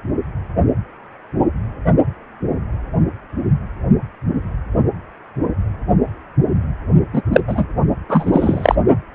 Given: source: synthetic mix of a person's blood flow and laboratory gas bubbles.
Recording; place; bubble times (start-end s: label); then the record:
Doppler ultrasound of blood flow; precordium
7.12-7.22 s: bubbles
7.32-7.40 s: bubbles
7.47-7.65 s: bubbles
8.08-8.75 s: bubbles
From the record:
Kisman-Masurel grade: 223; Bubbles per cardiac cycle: several, 3 to 8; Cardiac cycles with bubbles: 10 to 50%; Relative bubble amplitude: loud (0.450 to 0.775); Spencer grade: 2 (many but less than half of the cardiac periods contain bubble signals, singularly or in groups); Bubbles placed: only in the low amplitude regions of the cardiac cycle